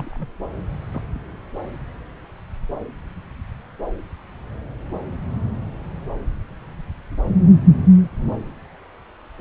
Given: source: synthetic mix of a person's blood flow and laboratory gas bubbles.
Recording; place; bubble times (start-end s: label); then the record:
Doppler ultrasound of blood flow; subclavian vein
0.00-0.26 s: bubbles
0.93-1.02 s: bubbles
From the record:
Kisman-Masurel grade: 111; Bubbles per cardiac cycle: 1 to 2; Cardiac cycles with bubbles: 1 to 10%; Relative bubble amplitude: barely perceptible (0.100 to 0.250); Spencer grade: 1 (occasional bubble signal discernible with the cardiac motion signal, with majority of cardiac periods free of bubbles); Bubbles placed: anywhere in the cardiac cycle